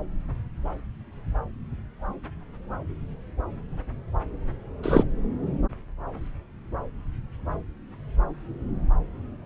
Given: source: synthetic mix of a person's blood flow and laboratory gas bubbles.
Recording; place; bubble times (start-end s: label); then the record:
Doppler ultrasound of blood flow; subclavian vein
4.83-5.04 s: bubbles
From the record:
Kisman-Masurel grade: 113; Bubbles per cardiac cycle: 1 to 2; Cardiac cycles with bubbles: 1 to 10%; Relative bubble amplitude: loud (0.450 to 0.775); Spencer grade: 1 (occasional bubble signal discernible with the cardiac motion signal, with majority of cardiac periods free of bubbles); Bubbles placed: anywhere in the cardiac cycle